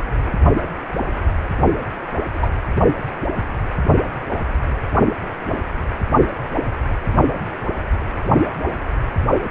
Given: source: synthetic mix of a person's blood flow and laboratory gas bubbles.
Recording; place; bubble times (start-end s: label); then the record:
Doppler ultrasound of blood flow; precordium
2.32-2.49 s: bubbles
From the record:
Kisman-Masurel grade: 111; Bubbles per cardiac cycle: 1 to 2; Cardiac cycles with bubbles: 1 to 10%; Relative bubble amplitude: barely perceptible (0.100 to 0.250); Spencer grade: 1 (occasional bubble signal discernible with the cardiac motion signal, with majority of cardiac periods free of bubbles); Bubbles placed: only in the low amplitude regions of the cardiac cycle